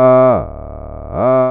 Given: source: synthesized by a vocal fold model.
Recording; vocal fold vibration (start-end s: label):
sustained vowel that changes in the middle
0.00-0.28 s: 128.4 Hz, open quotient 0.37
0.48-1.08 s: 37.2 Hz, open quotient 0.43
1.28-1.51 s: 128.4 Hz, open quotient 0.37